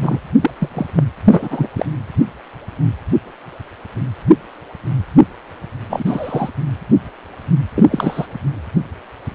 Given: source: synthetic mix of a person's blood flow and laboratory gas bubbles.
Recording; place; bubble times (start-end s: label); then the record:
Doppler ultrasound of blood flow; precordium
0.00-0.18 s: bubbles
0.40-0.50 s: bubbles
0.59-0.69 s: bubbles
0.74-0.86 s: bubbles
0.95-1.04 s: bubbles
1.28-1.67 s: bubbles
1.76-1.86 s: bubbles
5.89-6.04 s: bubbles
6.06-6.50 s: bubbles
7.75-7.87 s: bubbles
7.91-8.27 s: bubbles
From the record:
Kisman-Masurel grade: 223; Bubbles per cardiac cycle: several, 3 to 8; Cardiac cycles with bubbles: 10 to 50%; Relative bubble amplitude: loud (0.450 to 0.775); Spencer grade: 2 (many but less than half of the cardiac periods contain bubble signals, singularly or in groups); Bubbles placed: anywhere in the cardiac cycle